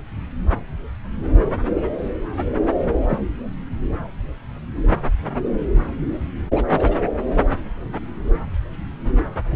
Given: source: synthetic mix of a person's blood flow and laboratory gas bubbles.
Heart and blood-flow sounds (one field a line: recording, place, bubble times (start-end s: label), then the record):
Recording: Doppler ultrasound of blood flow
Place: subclavian vein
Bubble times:
3.09-3.19 s: bubbles
6.55-6.64 s: bubbles
6.71-6.96 s: bubbles
From the record:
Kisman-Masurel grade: 121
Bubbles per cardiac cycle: 1 to 2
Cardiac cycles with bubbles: 10 to 50%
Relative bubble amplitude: barely perceptible (0.100 to 0.250)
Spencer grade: 2 (many but less than half of the cardiac periods contain bubble signals, singularly or in groups)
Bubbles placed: anywhere in the cardiac cycle